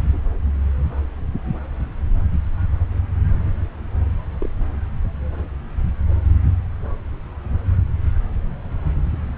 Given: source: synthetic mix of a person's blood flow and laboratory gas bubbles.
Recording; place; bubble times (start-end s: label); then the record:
Doppler ultrasound of blood flow; subclavian vein
4.40-4.50 s: bubbles
From the record:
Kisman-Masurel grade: 121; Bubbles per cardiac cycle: 1 to 2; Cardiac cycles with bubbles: 10 to 50%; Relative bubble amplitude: barely perceptible (0.100 to 0.250); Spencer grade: 2 (many but less than half of the cardiac periods contain bubble signals, singularly or in groups); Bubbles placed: anywhere in the cardiac cycle